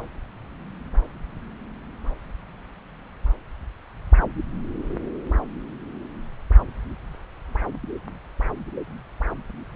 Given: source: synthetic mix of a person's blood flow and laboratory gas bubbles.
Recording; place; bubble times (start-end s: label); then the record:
Doppler ultrasound of blood flow; subclavian vein
no bubbles
From the record:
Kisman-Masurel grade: 000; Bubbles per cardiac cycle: 0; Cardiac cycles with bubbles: 0%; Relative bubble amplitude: no bubbles discernible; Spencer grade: 0 (complete lack of bubble signals)